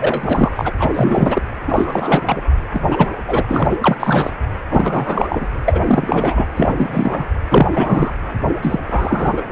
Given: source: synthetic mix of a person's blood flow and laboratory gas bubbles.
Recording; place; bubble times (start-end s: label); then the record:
Doppler ultrasound of blood flow; precordium
0.00-0.52 s: bubbles
0.55-0.73 s: bubbles
0.79-1.42 s: bubbles
1.68-2.22 s: bubbles
2.25-2.42 s: bubbles
2.72-2.81 s: bubbles
2.90-3.10 s: bubbles
3.27-3.44 s: bubbles
3.47-3.67 s: bubbles
3.71-3.76 s: bubbles
3.80-3.97 s: bubbles
4.00-4.30 s: bubbles
4.71-5.46 s: bubbles
5.66-5.80 s: bubbles
5.85-6.47 s: bubbles
6.55-6.75 s: bubbles
6.77-7.26 s: bubbles
7.50-7.68 s: bubbles
7.72-8.13 s: bubbles
8.62-8.79 s: bubbles
8.88-9.43 s: bubbles
From the record:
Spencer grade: 3 (all of the cardiac periods contain showers or single bubble signals, but not dominating or overriding the cardiac motion signals); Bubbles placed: anywhere in the cardiac cycle